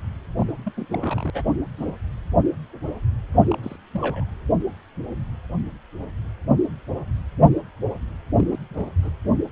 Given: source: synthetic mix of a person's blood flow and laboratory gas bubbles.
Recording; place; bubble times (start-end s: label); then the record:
Doppler ultrasound of blood flow; precordium
0.39-0.52 s: bubbles
0.65-0.72 s: bubbles
0.77-0.86 s: bubbles
0.92-1.30 s: bubbles
1.34-1.42 s: bubbles
1.45-1.55 s: bubbles
1.77-1.94 s: bubbles
3.48-3.55 s: bubbles
3.62-3.76 s: bubbles
3.94-4.25 s: bubbles
8.37-8.47 s: bubbles
8.50-8.60 s: bubbles
8.69-8.86 s: bubbles
9.03-9.12 s: bubbles
From the record:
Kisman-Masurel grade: 221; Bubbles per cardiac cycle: several, 3 to 8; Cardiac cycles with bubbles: 10 to 50%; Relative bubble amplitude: barely perceptible (0.100 to 0.250); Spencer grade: 2 (many but less than half of the cardiac periods contain bubble signals, singularly or in groups); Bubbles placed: anywhere in the cardiac cycle